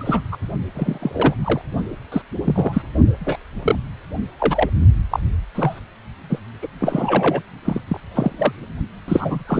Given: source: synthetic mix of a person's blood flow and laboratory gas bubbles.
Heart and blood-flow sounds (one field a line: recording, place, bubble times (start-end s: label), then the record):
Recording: Doppler ultrasound of blood flow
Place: precordium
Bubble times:
0.00-0.21 s: bubbles
0.32-0.37 s: bubbles
0.74-1.34 s: bubbles
1.44-1.61 s: bubbles
2.12-2.22 s: bubbles
2.44-2.82 s: bubbles
3.20-3.37 s: bubbles
3.62-3.76 s: bubbles
4.38-4.70 s: bubbles
5.11-5.20 s: bubbles
5.54-5.80 s: bubbles
6.29-6.39 s: bubbles
6.62-6.67 s: bubbles
6.80-7.42 s: bubbles
7.65-7.81 s: bubbles
7.88-8.00 s: bubbles
8.14-8.52 s: bubbles
9.08-9.44 s: bubbles
9.47-9.60 s: bubbles
From the record:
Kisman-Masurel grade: 243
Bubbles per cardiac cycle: several, 3 to 8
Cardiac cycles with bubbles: 100%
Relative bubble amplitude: loud (0.450 to 0.775)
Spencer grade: 3 (all of the cardiac periods contain showers or single bubble signals, but not dominating or overriding the cardiac motion signals)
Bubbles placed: only in the low amplitude regions of the cardiac cycle